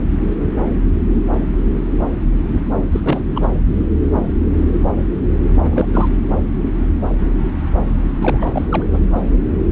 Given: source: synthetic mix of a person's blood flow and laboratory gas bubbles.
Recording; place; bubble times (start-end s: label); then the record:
Doppler ultrasound of blood flow; subclavian vein
2.92-3.00 s: bubbles
3.02-3.23 s: bubbles
3.35-3.48 s: bubbles
5.62-6.08 s: bubbles
8.20-8.66 s: bubbles
8.70-8.84 s: bubbles
8.92-8.99 s: bubbles
From the record:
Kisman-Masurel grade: 222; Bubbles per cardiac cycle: several, 3 to 8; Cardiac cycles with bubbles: 10 to 50%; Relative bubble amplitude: moderate (0.250 to 0.450); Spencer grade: 2 (many but less than half of the cardiac periods contain bubble signals, singularly or in groups); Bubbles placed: anywhere in the cardiac cycle